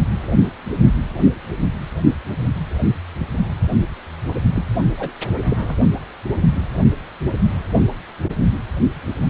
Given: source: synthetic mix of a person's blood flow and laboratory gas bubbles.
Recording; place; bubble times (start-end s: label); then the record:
Doppler ultrasound of blood flow; precordium
4.55-4.64 s: bubbles
4.97-5.10 s: bubbles
5.34-5.38 s: bubbles
5.45-5.76 s: bubbles
From the record:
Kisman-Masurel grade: 222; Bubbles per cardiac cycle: several, 3 to 8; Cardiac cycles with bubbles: 10 to 50%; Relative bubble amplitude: moderate (0.250 to 0.450); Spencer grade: 2 (many but less than half of the cardiac periods contain bubble signals, singularly or in groups); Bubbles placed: only in the low amplitude regions of the cardiac cycle